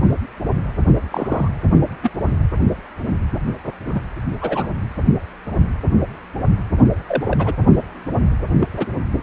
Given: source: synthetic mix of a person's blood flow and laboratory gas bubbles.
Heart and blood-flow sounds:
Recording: Doppler ultrasound of blood flow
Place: precordium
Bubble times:
1.12-1.48 s: bubbles
2.02-2.10 s: bubbles
3.85-4.01 s: bubbles
4.41-4.67 s: bubbles
7.08-7.55 s: bubbles
8.59-8.69 s: bubbles
8.77-8.87 s: bubbles
From the record:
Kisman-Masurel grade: 122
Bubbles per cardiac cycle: 1 to 2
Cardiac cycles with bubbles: 10 to 50%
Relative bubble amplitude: moderate (0.250 to 0.450)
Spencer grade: 2 (many but less than half of the cardiac periods contain bubble signals, singularly or in groups)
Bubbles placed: anywhere in the cardiac cycle

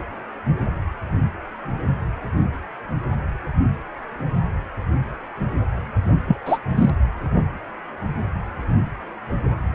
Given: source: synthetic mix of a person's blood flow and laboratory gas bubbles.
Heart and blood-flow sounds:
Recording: Doppler ultrasound of blood flow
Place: precordium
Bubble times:
6.27-6.37 s: bubbles
6.45-6.58 s: bubbles
6.74-6.90 s: bubbles
From the record:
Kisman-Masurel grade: 223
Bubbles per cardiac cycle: several, 3 to 8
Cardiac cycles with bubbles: 10 to 50%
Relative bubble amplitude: loud (0.450 to 0.775)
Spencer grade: 2 (many but less than half of the cardiac periods contain bubble signals, singularly or in groups)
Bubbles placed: anywhere in the cardiac cycle

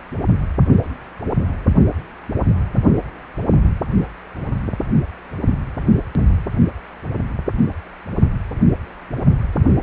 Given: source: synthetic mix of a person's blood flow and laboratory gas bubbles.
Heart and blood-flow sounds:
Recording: Doppler ultrasound of blood flow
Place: precordium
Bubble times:
no bubbles
From the record:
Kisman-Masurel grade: 000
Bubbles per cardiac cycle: 0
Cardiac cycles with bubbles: 0%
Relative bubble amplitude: no bubbles discernible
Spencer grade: 0 (complete lack of bubble signals)

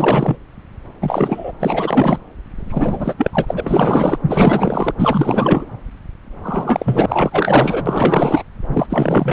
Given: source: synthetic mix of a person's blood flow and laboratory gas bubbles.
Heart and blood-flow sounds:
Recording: Doppler ultrasound of blood flow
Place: subclavian vein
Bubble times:
0.00-0.36 s: bubbles
1.01-1.52 s: bubbles
1.59-2.18 s: bubbles
2.58-3.15 s: bubbles
3.17-4.19 s: bubbles
4.25-4.92 s: bubbles
4.99-5.65 s: bubbles
6.43-8.43 s: bubbles
8.72-8.87 s: bubbles
8.89-9.33 s: bubbles
From the record:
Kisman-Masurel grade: 444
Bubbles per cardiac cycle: continuous sound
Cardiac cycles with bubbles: 100%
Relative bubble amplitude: maximal (0.775 to 0.999)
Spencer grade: 4 (maximum detectable bubble signal sounding continuously throughout systole and diastole of every cardiac period, and overriding the amplitude of the normal cardiac signals)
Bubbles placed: anywhere in the cardiac cycle

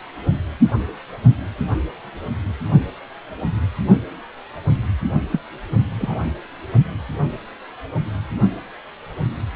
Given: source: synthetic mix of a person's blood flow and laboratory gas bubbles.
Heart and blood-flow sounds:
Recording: Doppler ultrasound of blood flow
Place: precordium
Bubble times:
5.31-5.40 s: bubbles
5.98-6.26 s: bubbles
From the record:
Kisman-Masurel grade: 122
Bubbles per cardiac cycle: 1 to 2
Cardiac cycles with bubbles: 10 to 50%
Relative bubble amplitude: moderate (0.250 to 0.450)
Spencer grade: 2 (many but less than half of the cardiac periods contain bubble signals, singularly or in groups)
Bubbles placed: only in the low amplitude regions of the cardiac cycle

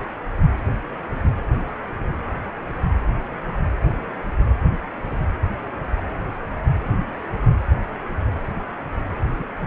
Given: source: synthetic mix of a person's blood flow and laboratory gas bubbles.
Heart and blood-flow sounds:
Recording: Doppler ultrasound of blood flow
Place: precordium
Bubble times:
9.33-9.43 s: bubbles
9.60-9.67 s: bubbles
From the record:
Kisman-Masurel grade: 111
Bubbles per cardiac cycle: 1 to 2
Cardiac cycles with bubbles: 1 to 10%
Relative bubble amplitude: barely perceptible (0.100 to 0.250)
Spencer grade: 1 (occasional bubble signal discernible with the cardiac motion signal, with majority of cardiac periods free of bubbles)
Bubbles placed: anywhere in the cardiac cycle

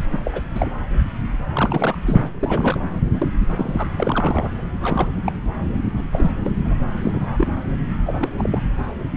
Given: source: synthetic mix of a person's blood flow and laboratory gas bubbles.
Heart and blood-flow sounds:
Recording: Doppler ultrasound of blood flow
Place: subclavian vein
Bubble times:
0.00-0.02 s: bubbles
0.10-0.19 s: bubbles
0.24-0.41 s: bubbles
0.54-0.70 s: bubbles
1.52-1.97 s: bubbles
2.06-2.30 s: bubbles
2.39-2.88 s: bubbles
3.12-3.28 s: bubbles
3.47-3.87 s: bubbles
3.96-4.51 s: bubbles
4.83-5.09 s: bubbles
5.25-5.32 s: bubbles
5.96-6.00 s: bubbles
6.12-6.30 s: bubbles
6.44-6.51 s: bubbles
6.64-6.75 s: bubbles
7.02-7.51 s: bubbles
8.06-8.29 s: bubbles
8.38-8.61 s: bubbles
From the record:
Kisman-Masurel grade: 242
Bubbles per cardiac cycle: several, 3 to 8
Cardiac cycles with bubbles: 100%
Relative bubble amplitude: moderate (0.250 to 0.450)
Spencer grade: 3 (all of the cardiac periods contain showers or single bubble signals, but not dominating or overriding the cardiac motion signals)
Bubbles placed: anywhere in the cardiac cycle

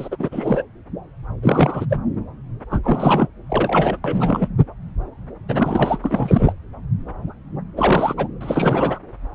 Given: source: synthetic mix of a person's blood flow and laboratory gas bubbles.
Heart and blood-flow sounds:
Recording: Doppler ultrasound of blood flow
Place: subclavian vein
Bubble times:
0.00-0.08 s: bubbles
0.11-0.62 s: bubbles
1.42-1.85 s: bubbles
1.90-1.97 s: bubbles
2.71-2.79 s: bubbles
2.83-3.27 s: bubbles
3.49-3.97 s: bubbles
4.04-4.47 s: bubbles
5.49-5.98 s: bubbles
6.02-6.52 s: bubbles
7.76-8.27 s: bubbles
8.41-8.99 s: bubbles
From the record:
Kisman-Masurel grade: 332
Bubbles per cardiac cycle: rolling drumbeat, 9 or more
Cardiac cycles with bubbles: 50 to 99%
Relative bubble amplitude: moderate (0.250 to 0.450)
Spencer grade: 3 (all of the cardiac periods contain showers or single bubble signals, but not dominating or overriding the cardiac motion signals)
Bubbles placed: anywhere in the cardiac cycle

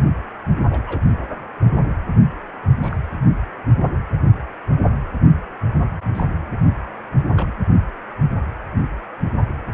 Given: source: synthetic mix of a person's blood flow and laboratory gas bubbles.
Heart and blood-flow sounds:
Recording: Doppler ultrasound of blood flow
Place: precordium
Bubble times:
0.56-0.62 s: bubbles
0.69-1.00 s: bubbles
2.81-2.96 s: bubbles
6.13-6.24 s: bubbles
7.34-7.51 s: bubbles
From the record:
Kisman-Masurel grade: 121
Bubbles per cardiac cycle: 1 to 2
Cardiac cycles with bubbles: 10 to 50%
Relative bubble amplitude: barely perceptible (0.100 to 0.250)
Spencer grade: 2 (many but less than half of the cardiac periods contain bubble signals, singularly or in groups)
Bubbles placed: only in the low amplitude regions of the cardiac cycle

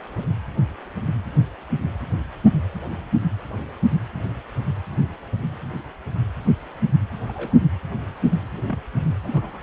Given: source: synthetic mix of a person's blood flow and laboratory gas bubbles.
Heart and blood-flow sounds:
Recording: Doppler ultrasound of blood flow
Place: precordium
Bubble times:
0.16-0.26 s: bubbles
7.29-7.56 s: bubbles
8.54-8.62 s: bubbles
8.67-8.79 s: bubbles
9.23-9.61 s: bubbles
From the record:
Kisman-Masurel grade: 121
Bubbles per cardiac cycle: 1 to 2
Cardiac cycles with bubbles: 10 to 50%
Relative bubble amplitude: barely perceptible (0.100 to 0.250)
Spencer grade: 2 (many but less than half of the cardiac periods contain bubble signals, singularly or in groups)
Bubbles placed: anywhere in the cardiac cycle

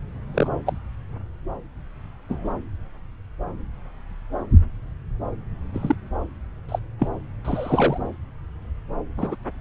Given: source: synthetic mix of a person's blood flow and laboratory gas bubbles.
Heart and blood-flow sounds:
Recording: Doppler ultrasound of blood flow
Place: subclavian vein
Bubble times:
0.34-0.47 s: bubbles
0.66-0.77 s: bubbles
2.29-2.52 s: bubbles
5.74-5.96 s: bubbles
6.69-6.79 s: bubbles
6.99-7.08 s: bubbles
7.45-7.98 s: bubbles
9.17-9.35 s: bubbles
From the record:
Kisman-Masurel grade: 122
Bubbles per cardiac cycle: 1 to 2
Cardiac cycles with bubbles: 10 to 50%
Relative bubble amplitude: moderate (0.250 to 0.450)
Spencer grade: 2 (many but less than half of the cardiac periods contain bubble signals, singularly or in groups)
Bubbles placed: anywhere in the cardiac cycle

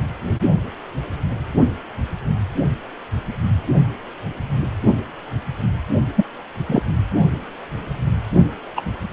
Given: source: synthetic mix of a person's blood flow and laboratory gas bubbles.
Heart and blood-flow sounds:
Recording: Doppler ultrasound of blood flow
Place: precordium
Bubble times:
6.16-6.26 s: bubbles
6.67-6.83 s: bubbles
8.77-8.81 s: bubbles
From the record:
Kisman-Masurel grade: 123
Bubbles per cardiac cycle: 1 to 2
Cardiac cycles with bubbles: 10 to 50%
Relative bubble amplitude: loud (0.450 to 0.775)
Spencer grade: 2 (many but less than half of the cardiac periods contain bubble signals, singularly or in groups)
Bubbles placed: only in the low amplitude regions of the cardiac cycle

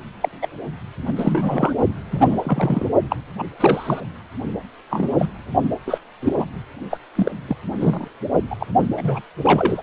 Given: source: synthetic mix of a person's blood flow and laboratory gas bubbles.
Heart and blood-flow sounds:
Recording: Doppler ultrasound of blood flow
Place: precordium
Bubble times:
0.21-0.28 s: bubbles
0.42-0.47 s: bubbles
1.06-1.13 s: bubbles
1.16-1.73 s: bubbles
2.11-2.87 s: bubbles
3.10-3.17 s: bubbles
3.38-3.44 s: bubbles
3.59-4.01 s: bubbles
4.90-5.09 s: bubbles
5.18-5.25 s: bubbles
5.86-5.99 s: bubbles
6.21-6.45 s: bubbles
6.90-6.98 s: bubbles
7.15-7.32 s: bubbles
7.48-7.56 s: bubbles
7.80-8.08 s: bubbles
8.50-8.55 s: bubbles
8.59-8.66 s: bubbles
8.97-9.21 s: bubbles
9.42-9.81 s: bubbles
From the record:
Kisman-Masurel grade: 232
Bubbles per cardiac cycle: several, 3 to 8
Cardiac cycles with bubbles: 50 to 99%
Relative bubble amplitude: moderate (0.250 to 0.450)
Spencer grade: 3 (all of the cardiac periods contain showers or single bubble signals, but not dominating or overriding the cardiac motion signals)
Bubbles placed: only in the low amplitude regions of the cardiac cycle

